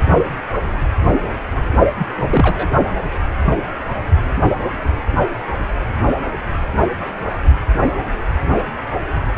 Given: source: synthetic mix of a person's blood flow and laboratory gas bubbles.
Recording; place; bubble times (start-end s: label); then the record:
Doppler ultrasound of blood flow; precordium
1.97-2.07 s: bubbles
2.15-2.68 s: bubbles
From the record:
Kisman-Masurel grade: 213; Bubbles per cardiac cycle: several, 3 to 8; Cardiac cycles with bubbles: 1 to 10%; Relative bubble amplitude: loud (0.450 to 0.775); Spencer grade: 1 (occasional bubble signal discernible with the cardiac motion signal, with majority of cardiac periods free of bubbles); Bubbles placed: only in the low amplitude regions of the cardiac cycle